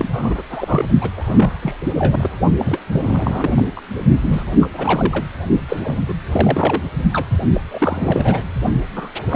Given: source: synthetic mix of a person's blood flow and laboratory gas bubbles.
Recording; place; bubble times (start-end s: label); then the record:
Doppler ultrasound of blood flow; precordium
0.00-0.07 s: bubbles
0.12-0.42 s: bubbles
0.49-0.85 s: bubbles
1.01-1.10 s: bubbles
1.16-1.76 s: bubbles
1.99-2.30 s: bubbles
2.58-2.81 s: bubbles
2.93-3.62 s: bubbles
3.76-3.80 s: bubbles
4.24-4.54 s: bubbles
4.61-4.68 s: bubbles
4.74-5.26 s: bubbles
5.69-5.96 s: bubbles
6.08-6.14 s: bubbles
6.33-6.82 s: bubbles
7.13-7.27 s: bubbles
7.53-7.62 s: bubbles
7.71-8.44 s: bubbles
8.96-9.10 s: bubbles
9.29-9.36 s: bubbles
From the record:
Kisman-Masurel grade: 342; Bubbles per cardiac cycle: rolling drumbeat, 9 or more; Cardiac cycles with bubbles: 100%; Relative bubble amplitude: moderate (0.250 to 0.450); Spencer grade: 3 (all of the cardiac periods contain showers or single bubble signals, but not dominating or overriding the cardiac motion signals); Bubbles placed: only in the low amplitude regions of the cardiac cycle